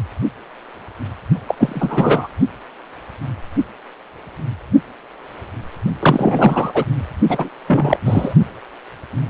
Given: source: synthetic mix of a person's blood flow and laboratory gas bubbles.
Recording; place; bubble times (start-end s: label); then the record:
Doppler ultrasound of blood flow; precordium
1.48-2.27 s: bubbles
6.00-6.85 s: bubbles
7.28-7.50 s: bubbles
7.68-7.97 s: bubbles
8.05-8.34 s: bubbles
From the record:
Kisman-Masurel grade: 223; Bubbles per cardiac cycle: several, 3 to 8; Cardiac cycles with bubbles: 10 to 50%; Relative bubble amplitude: loud (0.450 to 0.775); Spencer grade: 2 (many but less than half of the cardiac periods contain bubble signals, singularly or in groups); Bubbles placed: only in the low amplitude regions of the cardiac cycle